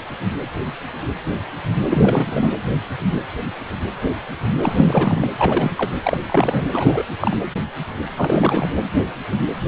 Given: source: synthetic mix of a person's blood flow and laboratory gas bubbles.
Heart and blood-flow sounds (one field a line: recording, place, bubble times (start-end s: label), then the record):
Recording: Doppler ultrasound of blood flow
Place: precordium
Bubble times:
1.89-2.51 s: bubbles
4.62-5.27 s: bubbles
5.37-5.71 s: bubbles
5.77-5.91 s: bubbles
6.02-6.17 s: bubbles
6.26-6.62 s: bubbles
6.71-7.03 s: bubbles
7.20-7.36 s: bubbles
8.16-8.71 s: bubbles
From the record:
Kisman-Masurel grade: 223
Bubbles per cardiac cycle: several, 3 to 8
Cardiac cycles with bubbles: 10 to 50%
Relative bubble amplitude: loud (0.450 to 0.775)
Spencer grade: 2 (many but less than half of the cardiac periods contain bubble signals, singularly or in groups)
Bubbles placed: anywhere in the cardiac cycle